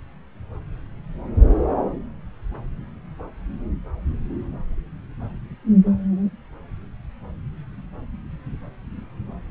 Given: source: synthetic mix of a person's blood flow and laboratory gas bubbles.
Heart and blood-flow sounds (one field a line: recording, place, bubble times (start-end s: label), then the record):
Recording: Doppler ultrasound of blood flow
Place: subclavian vein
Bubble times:
no bubbles
From the record:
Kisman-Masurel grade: 000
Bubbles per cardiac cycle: 0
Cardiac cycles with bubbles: 0%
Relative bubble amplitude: no bubbles discernible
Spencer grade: 0 (complete lack of bubble signals)